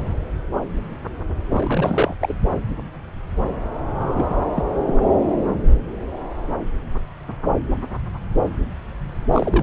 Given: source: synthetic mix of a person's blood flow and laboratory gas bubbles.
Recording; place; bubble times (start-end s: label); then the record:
Doppler ultrasound of blood flow; subclavian vein
1.49-2.15 s: bubbles
2.20-2.34 s: bubbles
4.00-4.35 s: bubbles
4.56-4.63 s: bubbles
4.87-4.94 s: bubbles
9.31-9.62 s: bubbles
From the record:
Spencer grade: 2 (many but less than half of the cardiac periods contain bubble signals, singularly or in groups); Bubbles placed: anywhere in the cardiac cycle